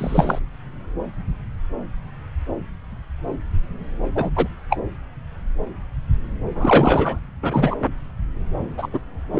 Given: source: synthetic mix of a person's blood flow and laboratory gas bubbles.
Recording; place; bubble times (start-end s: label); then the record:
Doppler ultrasound of blood flow; subclavian vein
0.00-0.39 s: bubbles
4.15-4.31 s: bubbles
4.35-4.48 s: bubbles
4.70-4.78 s: bubbles
6.54-7.19 s: bubbles
7.42-7.76 s: bubbles
8.77-8.88 s: bubbles
8.92-9.00 s: bubbles
9.32-9.40 s: bubbles
From the record:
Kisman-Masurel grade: 233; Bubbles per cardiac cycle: several, 3 to 8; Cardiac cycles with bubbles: 50 to 99%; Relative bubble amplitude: loud (0.450 to 0.775); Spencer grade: 3 (all of the cardiac periods contain showers or single bubble signals, but not dominating or overriding the cardiac motion signals); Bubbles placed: anywhere in the cardiac cycle